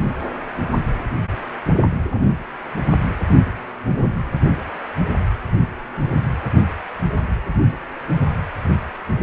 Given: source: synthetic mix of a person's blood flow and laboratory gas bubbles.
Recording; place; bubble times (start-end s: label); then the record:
Doppler ultrasound of blood flow; precordium
no bubbles
From the record:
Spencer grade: 0 (complete lack of bubble signals)